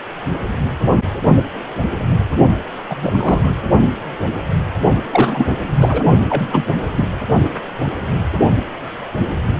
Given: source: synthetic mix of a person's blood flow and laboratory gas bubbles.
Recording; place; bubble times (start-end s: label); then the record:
Doppler ultrasound of blood flow; precordium
2.89-2.96 s: bubbles
3.02-3.54 s: bubbles
5.11-5.47 s: bubbles
5.80-6.04 s: bubbles
6.29-6.64 s: bubbles
6.96-7.08 s: bubbles
From the record:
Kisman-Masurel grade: 223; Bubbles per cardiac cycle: several, 3 to 8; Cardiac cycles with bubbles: 10 to 50%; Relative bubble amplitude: loud (0.450 to 0.775); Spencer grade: 2 (many but less than half of the cardiac periods contain bubble signals, singularly or in groups); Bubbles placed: only in the low amplitude regions of the cardiac cycle